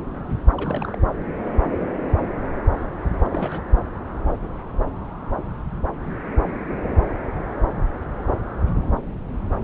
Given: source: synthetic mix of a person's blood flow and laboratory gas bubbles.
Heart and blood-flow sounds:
Doppler ultrasound of blood flow; subclavian vein
0.56-1.03 s: bubbles
3.23-3.62 s: bubbles
From the record:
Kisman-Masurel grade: 211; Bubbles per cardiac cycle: several, 3 to 8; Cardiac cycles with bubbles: 1 to 10%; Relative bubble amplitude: barely perceptible (0.100 to 0.250); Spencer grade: 1 (occasional bubble signal discernible with the cardiac motion signal, with majority of cardiac periods free of bubbles); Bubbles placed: anywhere in the cardiac cycle

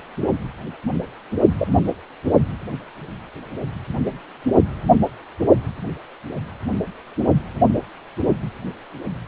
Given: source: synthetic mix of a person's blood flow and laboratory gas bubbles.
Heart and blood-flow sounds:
Doppler ultrasound of blood flow; precordium
1.58-1.77 s: bubbles
From the record:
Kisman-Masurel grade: 112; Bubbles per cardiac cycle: 1 to 2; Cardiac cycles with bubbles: 1 to 10%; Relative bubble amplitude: moderate (0.250 to 0.450); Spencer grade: 1 (occasional bubble signal discernible with the cardiac motion signal, with majority of cardiac periods free of bubbles); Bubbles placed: only in the low amplitude regions of the cardiac cycle

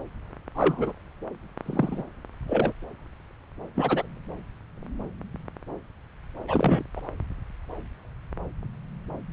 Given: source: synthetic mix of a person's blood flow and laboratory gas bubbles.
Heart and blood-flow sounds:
Doppler ultrasound of blood flow; subclavian vein
0.55-0.93 s: bubbles
1.65-2.03 s: bubbles
2.47-2.72 s: bubbles
3.75-4.06 s: bubbles
6.48-6.84 s: bubbles
6.96-7.00 s: bubbles
From the record:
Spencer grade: 2 (many but less than half of the cardiac periods contain bubble signals, singularly or in groups); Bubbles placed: anywhere in the cardiac cycle

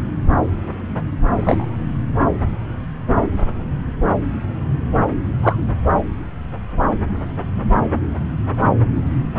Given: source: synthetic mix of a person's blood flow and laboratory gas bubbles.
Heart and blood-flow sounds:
Doppler ultrasound of blood flow; subclavian vein
1.36-1.66 s: bubbles
5.42-5.58 s: bubbles
From the record:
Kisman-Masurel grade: 123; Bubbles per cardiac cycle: 1 to 2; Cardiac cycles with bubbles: 10 to 50%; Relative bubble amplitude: loud (0.450 to 0.775); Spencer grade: 2 (many but less than half of the cardiac periods contain bubble signals, singularly or in groups); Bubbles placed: anywhere in the cardiac cycle

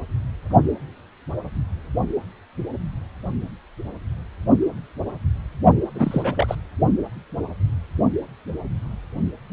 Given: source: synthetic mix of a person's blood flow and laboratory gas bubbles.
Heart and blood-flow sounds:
Doppler ultrasound of blood flow; precordium
5.95-6.55 s: bubbles
From the record:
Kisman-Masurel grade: 212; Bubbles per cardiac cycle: several, 3 to 8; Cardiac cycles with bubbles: 1 to 10%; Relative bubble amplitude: moderate (0.250 to 0.450); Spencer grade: 1 (occasional bubble signal discernible with the cardiac motion signal, with majority of cardiac periods free of bubbles); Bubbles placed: only in the low amplitude regions of the cardiac cycle

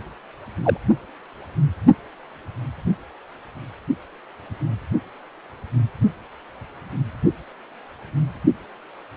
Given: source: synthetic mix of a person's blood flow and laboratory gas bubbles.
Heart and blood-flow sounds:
Doppler ultrasound of blood flow; precordium
0.64-0.77 s: bubbles
From the record:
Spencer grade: 1 (occasional bubble signal discernible with the cardiac motion signal, with majority of cardiac periods free of bubbles); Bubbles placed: only in the low amplitude regions of the cardiac cycle

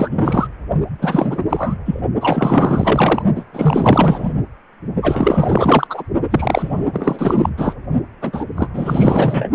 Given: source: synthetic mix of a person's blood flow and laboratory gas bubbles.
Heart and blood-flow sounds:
Doppler ultrasound of blood flow; precordium
0.00-0.48 s: bubbles
0.99-1.43 s: bubbles
1.49-1.77 s: bubbles
1.85-2.00 s: bubbles
2.20-3.23 s: bubbles
3.36-3.46 s: bubbles
3.53-4.33 s: bubbles
5.02-6.04 s: bubbles
6.30-6.88 s: bubbles
6.93-7.50 s: bubbles
7.57-7.74 s: bubbles
8.21-8.45 s: bubbles
8.57-8.70 s: bubbles
8.73-9.49 s: bubbles
From the record:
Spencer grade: 4 (maximum detectable bubble signal sounding continuously throughout systole and diastole of every cardiac period, and overriding the amplitude of the normal cardiac signals); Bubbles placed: only in the low amplitude regions of the cardiac cycle

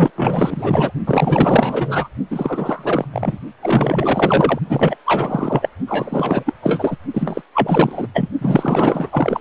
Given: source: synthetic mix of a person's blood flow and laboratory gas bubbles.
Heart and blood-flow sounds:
Doppler ultrasound of blood flow; precordium
0.00-0.11 s: bubbles
0.15-0.92 s: bubbles
1.06-2.08 s: bubbles
2.30-3.05 s: bubbles
3.12-3.38 s: bubbles
3.62-4.59 s: bubbles
4.69-4.97 s: bubbles
5.06-5.69 s: bubbles
5.88-6.54 s: bubbles
6.62-6.97 s: bubbles
7.13-7.42 s: bubbles
7.54-8.08 s: bubbles
8.13-8.30 s: bubbles
8.40-9.41 s: bubbles
From the record:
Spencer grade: 4 (maximum detectable bubble signal sounding continuously throughout systole and diastole of every cardiac period, and overriding the amplitude of the normal cardiac signals); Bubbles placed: only in the low amplitude regions of the cardiac cycle

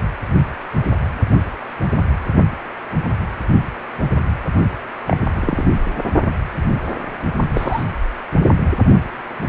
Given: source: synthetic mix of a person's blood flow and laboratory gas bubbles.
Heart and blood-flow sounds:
Doppler ultrasound of blood flow; precordium
5.06-5.17 s: bubbles
5.35-5.67 s: bubbles
7.54-7.83 s: bubbles
From the record:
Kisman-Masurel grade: 122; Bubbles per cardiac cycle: 1 to 2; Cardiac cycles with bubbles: 10 to 50%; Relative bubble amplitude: moderate (0.250 to 0.450); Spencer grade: 2 (many but less than half of the cardiac periods contain bubble signals, singularly or in groups); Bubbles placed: only in the low amplitude regions of the cardiac cycle

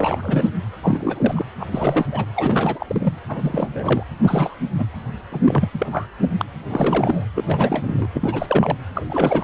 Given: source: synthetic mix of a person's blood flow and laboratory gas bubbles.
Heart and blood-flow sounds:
Doppler ultrasound of blood flow; precordium
0.00-0.49 s: bubbles
0.83-1.46 s: bubbles
1.60-1.66 s: bubbles
1.71-2.06 s: bubbles
2.12-2.25 s: bubbles
2.35-3.13 s: bubbles
3.29-4.03 s: bubbles
4.22-4.56 s: bubbles
4.79-4.85 s: bubbles
5.31-5.41 s: bubbles
5.45-5.68 s: bubbles
5.71-6.06 s: bubbles
6.22-6.27 s: bubbles
6.38-6.45 s: bubbles
6.69-7.26 s: bubbles
7.36-7.44 s: bubbles
7.47-8.08 s: bubbles
8.13-8.77 s: bubbles
8.95-9.43 s: bubbles
From the record:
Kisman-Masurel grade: 342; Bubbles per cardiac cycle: rolling drumbeat, 9 or more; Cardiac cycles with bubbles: 100%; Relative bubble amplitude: moderate (0.250 to 0.450); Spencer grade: 3 (all of the cardiac periods contain showers or single bubble signals, but not dominating or overriding the cardiac motion signals); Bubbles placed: anywhere in the cardiac cycle

